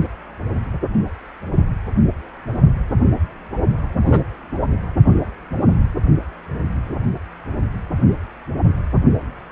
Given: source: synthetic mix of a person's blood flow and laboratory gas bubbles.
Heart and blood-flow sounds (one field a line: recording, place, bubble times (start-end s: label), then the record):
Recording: Doppler ultrasound of blood flow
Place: precordium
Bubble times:
4.04-4.24 s: bubbles
From the record:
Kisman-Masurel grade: 113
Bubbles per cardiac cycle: 1 to 2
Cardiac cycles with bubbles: 1 to 10%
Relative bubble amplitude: loud (0.450 to 0.775)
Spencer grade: 1 (occasional bubble signal discernible with the cardiac motion signal, with majority of cardiac periods free of bubbles)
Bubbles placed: only in the low amplitude regions of the cardiac cycle